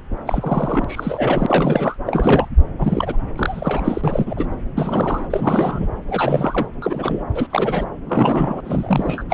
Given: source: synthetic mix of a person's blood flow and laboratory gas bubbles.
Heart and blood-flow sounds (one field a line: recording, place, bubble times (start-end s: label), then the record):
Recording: Doppler ultrasound of blood flow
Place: subclavian vein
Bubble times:
0.25-0.84 s: bubbles
0.88-1.96 s: bubbles
2.06-2.48 s: bubbles
2.79-3.17 s: bubbles
3.35-4.53 s: bubbles
4.76-5.28 s: bubbles
5.30-5.87 s: bubbles
6.08-6.67 s: bubbles
6.82-7.23 s: bubbles
7.34-7.48 s: bubbles
7.50-7.84 s: bubbles
8.05-8.60 s: bubbles
8.64-9.24 s: bubbles
9.29-9.34 s: bubbles
From the record:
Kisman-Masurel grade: 342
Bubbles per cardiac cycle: rolling drumbeat, 9 or more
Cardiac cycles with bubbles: 100%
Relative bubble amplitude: moderate (0.250 to 0.450)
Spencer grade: 3 (all of the cardiac periods contain showers or single bubble signals, but not dominating or overriding the cardiac motion signals)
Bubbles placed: anywhere in the cardiac cycle